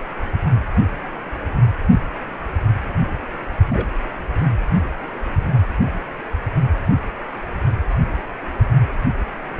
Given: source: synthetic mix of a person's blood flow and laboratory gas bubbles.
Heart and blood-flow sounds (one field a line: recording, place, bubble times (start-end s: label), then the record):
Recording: Doppler ultrasound of blood flow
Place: precordium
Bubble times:
3.68-3.86 s: bubbles
From the record:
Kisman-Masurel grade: 111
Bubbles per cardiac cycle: 1 to 2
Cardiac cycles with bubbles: 1 to 10%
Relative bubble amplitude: barely perceptible (0.100 to 0.250)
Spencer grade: 1 (occasional bubble signal discernible with the cardiac motion signal, with majority of cardiac periods free of bubbles)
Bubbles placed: anywhere in the cardiac cycle